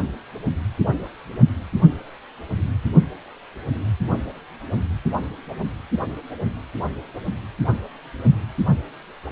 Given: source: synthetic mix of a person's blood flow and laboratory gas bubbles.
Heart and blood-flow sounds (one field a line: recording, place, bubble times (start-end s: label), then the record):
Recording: Doppler ultrasound of blood flow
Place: precordium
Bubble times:
0.00-0.03 s: bubbles
From the record:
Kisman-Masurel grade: 111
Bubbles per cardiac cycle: 1 to 2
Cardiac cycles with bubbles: 1 to 10%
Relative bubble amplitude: barely perceptible (0.100 to 0.250)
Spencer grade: 1 (occasional bubble signal discernible with the cardiac motion signal, with majority of cardiac periods free of bubbles)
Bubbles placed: only in the low amplitude regions of the cardiac cycle